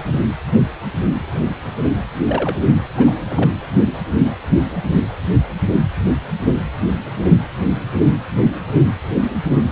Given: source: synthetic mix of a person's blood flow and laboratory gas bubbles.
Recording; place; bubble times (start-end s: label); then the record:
Doppler ultrasound of blood flow; precordium
2.27-2.57 s: bubbles
2.97-3.14 s: bubbles
3.30-3.50 s: bubbles
From the record:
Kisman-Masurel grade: 212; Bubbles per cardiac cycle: several, 3 to 8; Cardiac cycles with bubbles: 1 to 10%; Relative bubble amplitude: moderate (0.250 to 0.450); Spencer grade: 1 (occasional bubble signal discernible with the cardiac motion signal, with majority of cardiac periods free of bubbles); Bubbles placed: anywhere in the cardiac cycle